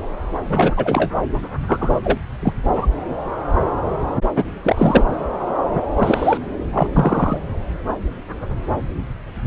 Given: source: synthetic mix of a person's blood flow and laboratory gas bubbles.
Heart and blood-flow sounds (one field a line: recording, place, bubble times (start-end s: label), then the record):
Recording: Doppler ultrasound of blood flow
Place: subclavian vein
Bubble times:
0.44-1.09 s: bubbles
1.67-2.01 s: bubbles
2.04-2.20 s: bubbles
2.42-2.53 s: bubbles
2.74-2.86 s: bubbles
4.36-4.44 s: bubbles
4.63-5.04 s: bubbles
5.94-6.38 s: bubbles
6.71-6.88 s: bubbles
6.96-7.40 s: bubbles
From the record:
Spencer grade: 3 (all of the cardiac periods contain showers or single bubble signals, but not dominating or overriding the cardiac motion signals)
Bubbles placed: anywhere in the cardiac cycle